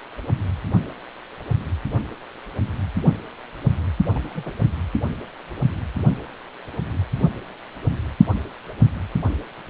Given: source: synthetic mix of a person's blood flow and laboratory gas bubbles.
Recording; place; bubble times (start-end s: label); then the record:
Doppler ultrasound of blood flow; precordium
4.12-4.50 s: bubbles
From the record:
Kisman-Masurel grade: 211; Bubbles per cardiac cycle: several, 3 to 8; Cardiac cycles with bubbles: 1 to 10%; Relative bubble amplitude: barely perceptible (0.100 to 0.250); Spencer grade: 1 (occasional bubble signal discernible with the cardiac motion signal, with majority of cardiac periods free of bubbles); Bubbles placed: only in the low amplitude regions of the cardiac cycle